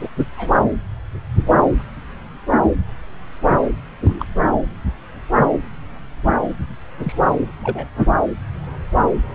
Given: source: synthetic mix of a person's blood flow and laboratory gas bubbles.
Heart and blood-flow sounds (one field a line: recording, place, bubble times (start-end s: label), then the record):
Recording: Doppler ultrasound of blood flow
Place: subclavian vein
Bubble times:
0.00-0.08 s: bubbles
0.30-0.53 s: bubbles
4.04-4.25 s: bubbles
7.03-7.15 s: bubbles
7.62-7.88 s: bubbles
From the record:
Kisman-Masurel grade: 122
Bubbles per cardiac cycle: 1 to 2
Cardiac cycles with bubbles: 10 to 50%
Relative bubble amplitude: moderate (0.250 to 0.450)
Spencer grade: 2 (many but less than half of the cardiac periods contain bubble signals, singularly or in groups)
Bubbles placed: anywhere in the cardiac cycle